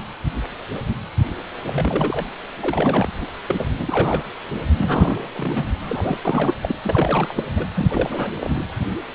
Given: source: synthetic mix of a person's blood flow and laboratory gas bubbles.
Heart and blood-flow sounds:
Doppler ultrasound of blood flow; precordium
1.67-2.26 s: bubbles
2.60-3.08 s: bubbles
3.20-3.27 s: bubbles
3.47-3.69 s: bubbles
3.77-4.25 s: bubbles
4.77-5.28 s: bubbles
5.35-5.65 s: bubbles
5.81-6.17 s: bubbles
6.25-6.54 s: bubbles
6.61-6.75 s: bubbles
6.84-7.43 s: bubbles
7.56-7.67 s: bubbles
7.75-8.65 s: bubbles
From the record:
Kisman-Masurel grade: 332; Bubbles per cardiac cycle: rolling drumbeat, 9 or more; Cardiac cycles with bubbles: 50 to 99%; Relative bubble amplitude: moderate (0.250 to 0.450); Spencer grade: 3 (all of the cardiac periods contain showers or single bubble signals, but not dominating or overriding the cardiac motion signals); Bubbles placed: anywhere in the cardiac cycle

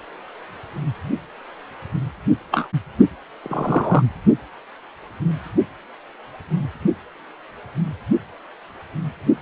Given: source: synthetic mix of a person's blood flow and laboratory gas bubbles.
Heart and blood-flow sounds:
Doppler ultrasound of blood flow; precordium
2.51-2.67 s: bubbles
3.44-4.03 s: bubbles
From the record:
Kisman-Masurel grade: 123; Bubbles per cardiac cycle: 1 to 2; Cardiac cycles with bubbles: 10 to 50%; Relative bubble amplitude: loud (0.450 to 0.775); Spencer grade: 2 (many but less than half of the cardiac periods contain bubble signals, singularly or in groups); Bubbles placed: only in the low amplitude regions of the cardiac cycle

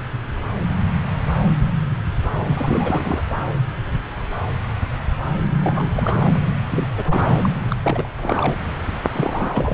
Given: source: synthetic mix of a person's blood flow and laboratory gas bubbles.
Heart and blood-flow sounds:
Doppler ultrasound of blood flow; subclavian vein
2.48-3.23 s: bubbles
5.63-6.53 s: bubbles
6.71-6.88 s: bubbles
6.97-7.04 s: bubbles
7.07-7.50 s: bubbles
7.70-7.76 s: bubbles
7.83-8.10 s: bubbles
8.18-8.55 s: bubbles
9.13-9.74 s: bubbles
From the record:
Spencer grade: 3 (all of the cardiac periods contain showers or single bubble signals, but not dominating or overriding the cardiac motion signals); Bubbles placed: anywhere in the cardiac cycle

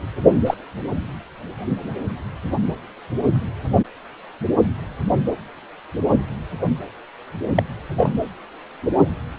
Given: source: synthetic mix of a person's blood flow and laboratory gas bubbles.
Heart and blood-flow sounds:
Doppler ultrasound of blood flow; precordium
0.46-0.54 s: bubbles
7.55-7.63 s: bubbles
7.97-8.12 s: bubbles
From the record:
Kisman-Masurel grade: 113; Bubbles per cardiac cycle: 1 to 2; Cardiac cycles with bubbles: 1 to 10%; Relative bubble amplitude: loud (0.450 to 0.775); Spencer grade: 1 (occasional bubble signal discernible with the cardiac motion signal, with majority of cardiac periods free of bubbles); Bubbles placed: anywhere in the cardiac cycle

